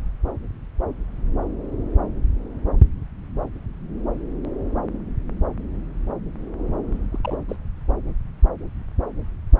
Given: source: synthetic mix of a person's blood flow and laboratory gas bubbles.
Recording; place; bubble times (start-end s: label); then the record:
Doppler ultrasound of blood flow; subclavian vein
6.93-6.99 s: bubbles
7.12-7.18 s: bubbles
7.23-7.36 s: bubbles
7.49-7.56 s: bubbles
From the record:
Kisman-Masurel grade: 211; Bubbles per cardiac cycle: several, 3 to 8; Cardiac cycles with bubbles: 1 to 10%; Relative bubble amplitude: barely perceptible (0.100 to 0.250); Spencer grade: 1 (occasional bubble signal discernible with the cardiac motion signal, with majority of cardiac periods free of bubbles); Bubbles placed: anywhere in the cardiac cycle